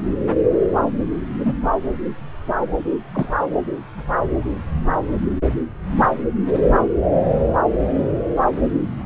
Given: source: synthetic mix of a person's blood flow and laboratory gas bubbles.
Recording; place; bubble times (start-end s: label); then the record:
Doppler ultrasound of blood flow; subclavian vein
1.29-1.54 s: bubbles
3.13-3.35 s: bubbles
From the record:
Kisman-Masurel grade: 122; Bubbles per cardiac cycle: 1 to 2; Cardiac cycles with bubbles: 10 to 50%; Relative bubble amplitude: moderate (0.250 to 0.450); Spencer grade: 2 (many but less than half of the cardiac periods contain bubble signals, singularly or in groups); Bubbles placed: anywhere in the cardiac cycle